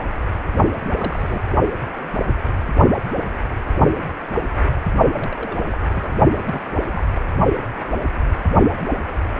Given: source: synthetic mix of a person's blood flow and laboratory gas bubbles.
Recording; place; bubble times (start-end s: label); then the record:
Doppler ultrasound of blood flow; precordium
0.86-0.94 s: bubbles
0.97-1.42 s: bubbles
5.15-5.58 s: bubbles
5.71-5.75 s: bubbles
5.90-6.20 s: bubbles
6.31-6.81 s: bubbles
6.85-7.03 s: bubbles
7.15-7.18 s: bubbles
From the record:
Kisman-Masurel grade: 221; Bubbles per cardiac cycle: several, 3 to 8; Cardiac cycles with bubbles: 10 to 50%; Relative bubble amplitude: barely perceptible (0.100 to 0.250); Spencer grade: 2 (many but less than half of the cardiac periods contain bubble signals, singularly or in groups); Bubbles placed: only in the low amplitude regions of the cardiac cycle